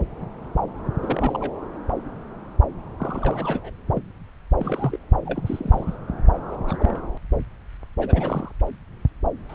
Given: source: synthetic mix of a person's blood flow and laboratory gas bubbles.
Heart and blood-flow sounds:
Doppler ultrasound of blood flow; subclavian vein
0.99-1.52 s: bubbles
2.98-3.70 s: bubbles
3.86-4.01 s: bubbles
4.58-4.97 s: bubbles
5.26-5.97 s: bubbles
6.51-6.57 s: bubbles
6.66-7.01 s: bubbles
7.98-8.52 s: bubbles
9.48-9.55 s: bubbles
From the record:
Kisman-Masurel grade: 221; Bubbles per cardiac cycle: several, 3 to 8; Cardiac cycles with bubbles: 10 to 50%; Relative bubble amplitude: barely perceptible (0.100 to 0.250); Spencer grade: 2 (many but less than half of the cardiac periods contain bubble signals, singularly or in groups); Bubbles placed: anywhere in the cardiac cycle

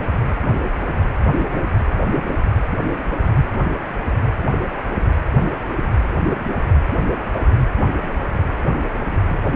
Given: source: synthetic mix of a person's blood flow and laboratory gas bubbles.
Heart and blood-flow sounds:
Doppler ultrasound of blood flow; precordium
no bubbles
From the record:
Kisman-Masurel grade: 000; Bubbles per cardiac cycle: 0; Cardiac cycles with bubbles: 0%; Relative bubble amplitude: no bubbles discernible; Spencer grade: 0 (complete lack of bubble signals)

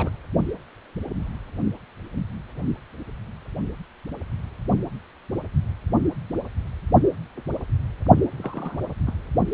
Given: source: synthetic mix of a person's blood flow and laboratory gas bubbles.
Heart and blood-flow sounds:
Doppler ultrasound of blood flow; precordium
0.00-0.10 s: bubbles
8.38-8.79 s: bubbles
9.07-9.13 s: bubbles
From the record:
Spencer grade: 2 (many but less than half of the cardiac periods contain bubble signals, singularly or in groups); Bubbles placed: only in the low amplitude regions of the cardiac cycle

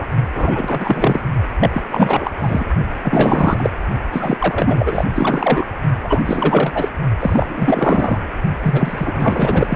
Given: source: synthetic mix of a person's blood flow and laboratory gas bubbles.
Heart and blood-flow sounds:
Doppler ultrasound of blood flow; precordium
0.00-0.07 s: bubbles
0.34-1.20 s: bubbles
1.60-1.70 s: bubbles
1.73-1.83 s: bubbles
1.92-2.31 s: bubbles
2.38-2.65 s: bubbles
3.03-3.70 s: bubbles
4.12-4.37 s: bubbles
4.40-5.07 s: bubbles
5.15-5.65 s: bubbles
6.04-6.22 s: bubbles
6.25-6.88 s: bubbles
7.20-8.19 s: bubbles
8.62-9.76 s: bubbles
From the record:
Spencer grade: 4 (maximum detectable bubble signal sounding continuously throughout systole and diastole of every cardiac period, and overriding the amplitude of the normal cardiac signals); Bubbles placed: only in the low amplitude regions of the cardiac cycle

